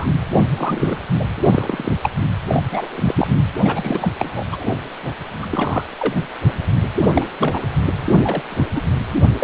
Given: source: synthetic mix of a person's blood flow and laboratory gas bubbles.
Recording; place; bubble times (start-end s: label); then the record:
Doppler ultrasound of blood flow; precordium
0.00-0.06 s: bubbles
0.57-0.97 s: bubbles
1.19-1.25 s: bubbles
1.35-1.92 s: bubbles
2.02-2.10 s: bubbles
2.48-2.62 s: bubbles
2.72-3.27 s: bubbles
3.65-4.12 s: bubbles
4.19-4.44 s: bubbles
4.51-4.76 s: bubbles
5.02-5.14 s: bubbles
5.42-5.46 s: bubbles
5.51-5.82 s: bubbles
5.98-6.26 s: bubbles
7.13-7.25 s: bubbles
7.39-7.66 s: bubbles
8.05-8.13 s: bubbles
8.23-8.42 s: bubbles
8.50-8.65 s: bubbles
8.76-8.82 s: bubbles
9.41-9.44 s: bubbles
From the record:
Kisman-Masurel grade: 242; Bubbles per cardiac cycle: several, 3 to 8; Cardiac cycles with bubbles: 100%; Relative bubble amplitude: moderate (0.250 to 0.450); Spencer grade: 3 (all of the cardiac periods contain showers or single bubble signals, but not dominating or overriding the cardiac motion signals); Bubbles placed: anywhere in the cardiac cycle